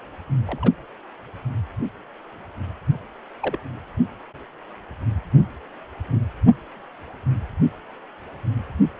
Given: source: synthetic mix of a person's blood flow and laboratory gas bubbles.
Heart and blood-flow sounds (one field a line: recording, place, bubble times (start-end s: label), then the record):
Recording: Doppler ultrasound of blood flow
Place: precordium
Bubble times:
0.46-0.74 s: bubbles
3.42-3.58 s: bubbles
From the record:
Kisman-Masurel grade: 121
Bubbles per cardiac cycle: 1 to 2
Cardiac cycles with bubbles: 10 to 50%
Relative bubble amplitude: barely perceptible (0.100 to 0.250)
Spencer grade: 2 (many but less than half of the cardiac periods contain bubble signals, singularly or in groups)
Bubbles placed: only in the low amplitude regions of the cardiac cycle